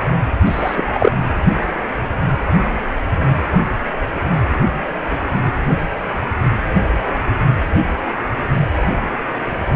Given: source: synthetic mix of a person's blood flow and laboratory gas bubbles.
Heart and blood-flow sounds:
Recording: Doppler ultrasound of blood flow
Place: precordium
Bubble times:
0.45-0.83 s: bubbles
0.88-1.11 s: bubbles
From the record:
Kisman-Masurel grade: 223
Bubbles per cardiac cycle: several, 3 to 8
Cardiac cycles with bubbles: 10 to 50%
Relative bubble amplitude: loud (0.450 to 0.775)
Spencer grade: 2 (many but less than half of the cardiac periods contain bubble signals, singularly or in groups)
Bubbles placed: anywhere in the cardiac cycle

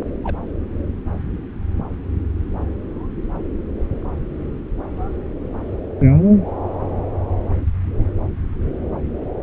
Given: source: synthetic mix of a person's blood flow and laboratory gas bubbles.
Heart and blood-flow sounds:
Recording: Doppler ultrasound of blood flow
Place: subclavian vein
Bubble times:
0.23-0.36 s: bubbles
From the record:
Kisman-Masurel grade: 111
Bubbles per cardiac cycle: 1 to 2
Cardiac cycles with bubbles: 1 to 10%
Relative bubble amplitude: barely perceptible (0.100 to 0.250)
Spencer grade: 1 (occasional bubble signal discernible with the cardiac motion signal, with majority of cardiac periods free of bubbles)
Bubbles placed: anywhere in the cardiac cycle

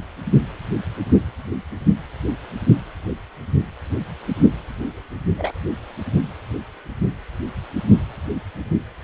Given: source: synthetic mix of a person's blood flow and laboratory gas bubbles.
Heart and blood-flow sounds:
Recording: Doppler ultrasound of blood flow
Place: precordium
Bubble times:
5.36-5.59 s: bubbles
From the record:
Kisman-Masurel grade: 122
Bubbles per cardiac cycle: 1 to 2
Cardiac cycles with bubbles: 10 to 50%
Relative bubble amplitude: moderate (0.250 to 0.450)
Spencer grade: 2 (many but less than half of the cardiac periods contain bubble signals, singularly or in groups)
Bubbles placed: only in the low amplitude regions of the cardiac cycle

